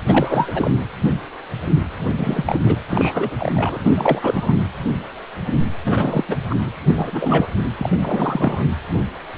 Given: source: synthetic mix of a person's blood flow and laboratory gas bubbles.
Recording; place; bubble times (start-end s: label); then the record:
Doppler ultrasound of blood flow; precordium
0.07-0.70 s: bubbles
1.99-2.60 s: bubbles
2.63-2.79 s: bubbles
2.89-3.79 s: bubbles
3.83-4.54 s: bubbles
5.84-6.24 s: bubbles
6.28-6.37 s: bubbles
6.50-6.56 s: bubbles
6.67-6.71 s: bubbles
6.87-7.48 s: bubbles
7.78-7.90 s: bubbles
7.92-7.96 s: bubbles
8.01-8.66 s: bubbles
From the record:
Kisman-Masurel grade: 333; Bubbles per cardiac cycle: rolling drumbeat, 9 or more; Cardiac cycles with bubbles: 50 to 99%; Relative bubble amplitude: loud (0.450 to 0.775); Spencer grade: 3 (all of the cardiac periods contain showers or single bubble signals, but not dominating or overriding the cardiac motion signals); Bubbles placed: anywhere in the cardiac cycle